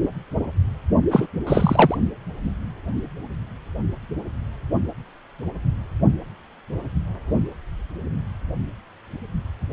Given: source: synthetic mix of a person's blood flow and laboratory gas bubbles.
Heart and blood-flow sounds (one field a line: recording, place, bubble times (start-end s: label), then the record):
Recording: Doppler ultrasound of blood flow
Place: precordium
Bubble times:
1.10-1.27 s: bubbles
1.47-1.97 s: bubbles
From the record:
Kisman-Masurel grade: 213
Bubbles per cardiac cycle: several, 3 to 8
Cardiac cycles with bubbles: 1 to 10%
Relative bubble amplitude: loud (0.450 to 0.775)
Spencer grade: 1 (occasional bubble signal discernible with the cardiac motion signal, with majority of cardiac periods free of bubbles)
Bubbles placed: only in the low amplitude regions of the cardiac cycle